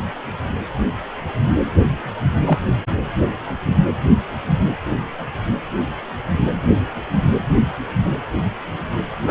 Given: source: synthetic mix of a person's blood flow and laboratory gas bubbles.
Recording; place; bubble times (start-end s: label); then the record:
Doppler ultrasound of blood flow; precordium
2.45-2.58 s: bubbles
9.27-9.31 s: bubbles
From the record:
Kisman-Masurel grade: 123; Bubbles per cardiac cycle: 1 to 2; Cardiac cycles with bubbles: 10 to 50%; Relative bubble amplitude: loud (0.450 to 0.775); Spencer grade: 2 (many but less than half of the cardiac periods contain bubble signals, singularly or in groups); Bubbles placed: anywhere in the cardiac cycle